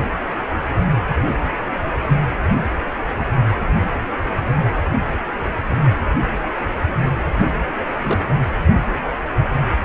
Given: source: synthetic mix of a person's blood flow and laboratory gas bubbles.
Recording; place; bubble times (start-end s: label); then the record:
Doppler ultrasound of blood flow; precordium
8.02-8.20 s: bubbles
From the record:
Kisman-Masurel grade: 112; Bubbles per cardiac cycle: 1 to 2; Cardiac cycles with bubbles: 1 to 10%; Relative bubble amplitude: moderate (0.250 to 0.450); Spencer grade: 1 (occasional bubble signal discernible with the cardiac motion signal, with majority of cardiac periods free of bubbles); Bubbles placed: anywhere in the cardiac cycle